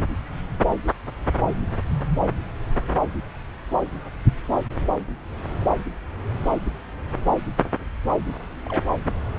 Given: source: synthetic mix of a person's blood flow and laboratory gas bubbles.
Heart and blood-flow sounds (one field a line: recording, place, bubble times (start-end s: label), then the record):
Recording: Doppler ultrasound of blood flow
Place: subclavian vein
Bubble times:
8.66-8.86 s: bubbles
From the record:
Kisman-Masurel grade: 111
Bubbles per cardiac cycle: 1 to 2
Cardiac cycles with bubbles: 1 to 10%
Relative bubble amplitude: barely perceptible (0.100 to 0.250)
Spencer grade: 1 (occasional bubble signal discernible with the cardiac motion signal, with majority of cardiac periods free of bubbles)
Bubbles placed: anywhere in the cardiac cycle